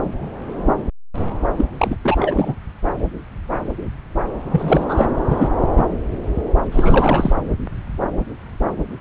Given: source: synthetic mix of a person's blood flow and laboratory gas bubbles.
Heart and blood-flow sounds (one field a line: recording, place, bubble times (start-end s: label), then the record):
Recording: Doppler ultrasound of blood flow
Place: subclavian vein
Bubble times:
1.56-1.65 s: bubbles
1.77-1.96 s: bubbles
2.04-2.54 s: bubbles
4.52-5.06 s: bubbles
5.29-5.48 s: bubbles
5.77-5.84 s: bubbles
6.71-7.32 s: bubbles
From the record:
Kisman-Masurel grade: 223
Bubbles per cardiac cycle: several, 3 to 8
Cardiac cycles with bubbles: 10 to 50%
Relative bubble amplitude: loud (0.450 to 0.775)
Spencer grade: 2 (many but less than half of the cardiac periods contain bubble signals, singularly or in groups)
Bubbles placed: anywhere in the cardiac cycle